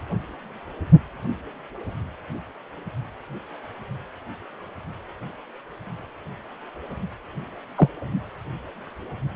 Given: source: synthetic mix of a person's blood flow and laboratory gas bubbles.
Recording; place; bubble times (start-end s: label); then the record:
Doppler ultrasound of blood flow; precordium
7.76-7.89 s: bubbles
From the record:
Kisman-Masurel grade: 113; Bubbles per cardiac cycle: 1 to 2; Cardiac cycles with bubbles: 1 to 10%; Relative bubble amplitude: loud (0.450 to 0.775); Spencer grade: 1 (occasional bubble signal discernible with the cardiac motion signal, with majority of cardiac periods free of bubbles); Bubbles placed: only in the low amplitude regions of the cardiac cycle